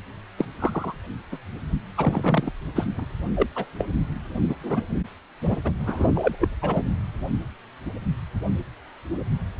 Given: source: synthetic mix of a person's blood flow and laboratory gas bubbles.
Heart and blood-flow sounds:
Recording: Doppler ultrasound of blood flow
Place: precordium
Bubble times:
0.38-0.45 s: bubbles
0.58-0.95 s: bubbles
1.31-1.37 s: bubbles
1.97-2.52 s: bubbles
2.75-2.85 s: bubbles
2.98-3.05 s: bubbles
3.35-3.46 s: bubbles
3.55-3.66 s: bubbles
3.79-3.85 s: bubbles
4.49-4.55 s: bubbles
4.63-4.82 s: bubbles
5.49-5.58 s: bubbles
5.64-5.73 s: bubbles
5.87-6.08 s: bubbles
6.15-6.36 s: bubbles
6.39-6.48 s: bubbles
6.62-6.83 s: bubbles
From the record:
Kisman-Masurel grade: 232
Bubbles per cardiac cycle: several, 3 to 8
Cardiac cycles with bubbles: 50 to 99%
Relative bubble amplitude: moderate (0.250 to 0.450)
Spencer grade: 3 (all of the cardiac periods contain showers or single bubble signals, but not dominating or overriding the cardiac motion signals)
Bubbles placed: anywhere in the cardiac cycle

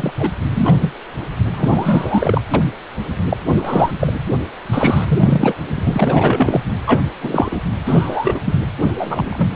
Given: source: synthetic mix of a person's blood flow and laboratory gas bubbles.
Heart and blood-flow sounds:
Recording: Doppler ultrasound of blood flow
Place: precordium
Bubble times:
0.00-0.13 s: bubbles
0.19-0.31 s: bubbles
0.53-0.76 s: bubbles
0.81-0.94 s: bubbles
1.50-2.42 s: bubbles
2.54-2.62 s: bubbles
3.29-3.37 s: bubbles
3.56-3.91 s: bubbles
4.00-4.13 s: bubbles
4.66-5.54 s: bubbles
5.68-6.61 s: bubbles
6.87-7.02 s: bubbles
7.23-7.59 s: bubbles
7.85-8.40 s: bubbles
8.46-8.57 s: bubbles
8.81-9.48 s: bubbles
From the record:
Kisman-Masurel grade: 243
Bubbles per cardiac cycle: several, 3 to 8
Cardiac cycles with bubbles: 100%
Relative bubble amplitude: loud (0.450 to 0.775)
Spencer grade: 3 (all of the cardiac periods contain showers or single bubble signals, but not dominating or overriding the cardiac motion signals)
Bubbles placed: anywhere in the cardiac cycle

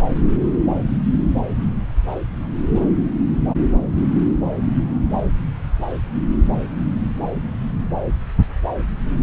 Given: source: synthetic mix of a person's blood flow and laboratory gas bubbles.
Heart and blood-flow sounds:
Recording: Doppler ultrasound of blood flow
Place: subclavian vein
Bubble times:
0.10-0.15 s: bubbles
From the record:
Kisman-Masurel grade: 211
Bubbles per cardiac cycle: several, 3 to 8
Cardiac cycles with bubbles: 1 to 10%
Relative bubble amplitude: barely perceptible (0.100 to 0.250)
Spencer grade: 1 (occasional bubble signal discernible with the cardiac motion signal, with majority of cardiac periods free of bubbles)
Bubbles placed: anywhere in the cardiac cycle

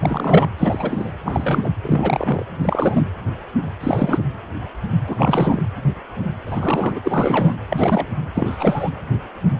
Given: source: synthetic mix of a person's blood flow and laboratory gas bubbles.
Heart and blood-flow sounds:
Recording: Doppler ultrasound of blood flow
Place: precordium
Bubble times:
0.00-0.47 s: bubbles
0.58-1.13 s: bubbles
1.24-1.70 s: bubbles
1.84-2.45 s: bubbles
2.62-3.05 s: bubbles
3.80-4.22 s: bubbles
5.06-5.62 s: bubbles
6.46-6.99 s: bubbles
7.04-7.54 s: bubbles
7.69-8.07 s: bubbles
8.35-8.90 s: bubbles
From the record:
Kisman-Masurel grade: 333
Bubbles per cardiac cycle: rolling drumbeat, 9 or more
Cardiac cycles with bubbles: 50 to 99%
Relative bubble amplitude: loud (0.450 to 0.775)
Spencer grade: 3 (all of the cardiac periods contain showers or single bubble signals, but not dominating or overriding the cardiac motion signals)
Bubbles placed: anywhere in the cardiac cycle

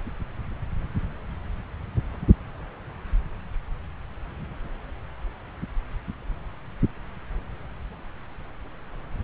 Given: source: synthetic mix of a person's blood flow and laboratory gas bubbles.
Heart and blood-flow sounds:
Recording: Doppler ultrasound of blood flow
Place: subclavian vein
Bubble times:
no bubbles
From the record:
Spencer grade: 0 (complete lack of bubble signals)

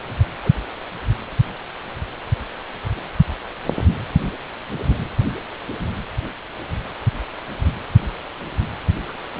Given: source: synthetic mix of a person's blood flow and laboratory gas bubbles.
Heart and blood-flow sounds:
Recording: Doppler ultrasound of blood flow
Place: precordium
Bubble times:
0.43-0.52 s: bubbles
2.96-3.00 s: bubbles
9.08-9.22 s: bubbles
From the record:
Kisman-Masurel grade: 121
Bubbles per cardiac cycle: 1 to 2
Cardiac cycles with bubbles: 10 to 50%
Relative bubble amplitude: barely perceptible (0.100 to 0.250)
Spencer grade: 2 (many but less than half of the cardiac periods contain bubble signals, singularly or in groups)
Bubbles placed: anywhere in the cardiac cycle

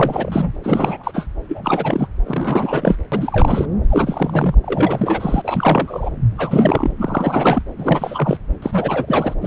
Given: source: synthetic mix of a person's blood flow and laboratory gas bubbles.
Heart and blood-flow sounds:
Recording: Doppler ultrasound of blood flow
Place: subclavian vein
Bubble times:
0.00-0.53 s: bubbles
0.64-1.11 s: bubbles
1.13-1.26 s: bubbles
1.48-2.08 s: bubbles
2.24-2.97 s: bubbles
3.12-3.65 s: bubbles
3.89-4.54 s: bubbles
4.62-6.10 s: bubbles
6.38-6.92 s: bubbles
6.98-7.62 s: bubbles
7.78-8.38 s: bubbles
8.62-9.34 s: bubbles
9.41-9.47 s: bubbles
From the record:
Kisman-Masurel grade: 343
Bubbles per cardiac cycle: rolling drumbeat, 9 or more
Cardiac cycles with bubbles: 100%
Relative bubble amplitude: loud (0.450 to 0.775)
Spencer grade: 3 (all of the cardiac periods contain showers or single bubble signals, but not dominating or overriding the cardiac motion signals)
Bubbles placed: anywhere in the cardiac cycle

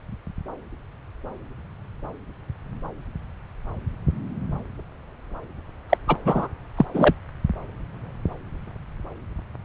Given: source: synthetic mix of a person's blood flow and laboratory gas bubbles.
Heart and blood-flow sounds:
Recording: Doppler ultrasound of blood flow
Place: subclavian vein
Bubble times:
5.90-5.98 s: bubbles
6.08-6.16 s: bubbles
6.25-6.49 s: bubbles
6.77-6.86 s: bubbles
6.94-7.15 s: bubbles
From the record:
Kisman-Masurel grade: 213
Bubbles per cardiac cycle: several, 3 to 8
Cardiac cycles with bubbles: 1 to 10%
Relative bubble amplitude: loud (0.450 to 0.775)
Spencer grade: 1 (occasional bubble signal discernible with the cardiac motion signal, with majority of cardiac periods free of bubbles)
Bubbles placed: anywhere in the cardiac cycle

